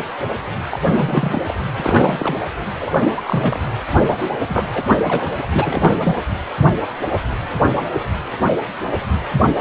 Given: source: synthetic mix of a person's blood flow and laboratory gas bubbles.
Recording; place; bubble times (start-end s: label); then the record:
Doppler ultrasound of blood flow; precordium
0.71-0.79 s: bubbles
0.85-1.43 s: bubbles
1.47-1.61 s: bubbles
1.76-2.35 s: bubbles
2.81-2.98 s: bubbles
3.10-3.22 s: bubbles
3.25-3.58 s: bubbles
4.07-4.29 s: bubbles
4.40-4.46 s: bubbles
4.48-4.70 s: bubbles
4.73-5.25 s: bubbles
5.37-5.47 s: bubbles
5.52-6.16 s: bubbles
From the record:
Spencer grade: 3 (all of the cardiac periods contain showers or single bubble signals, but not dominating or overriding the cardiac motion signals); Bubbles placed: anywhere in the cardiac cycle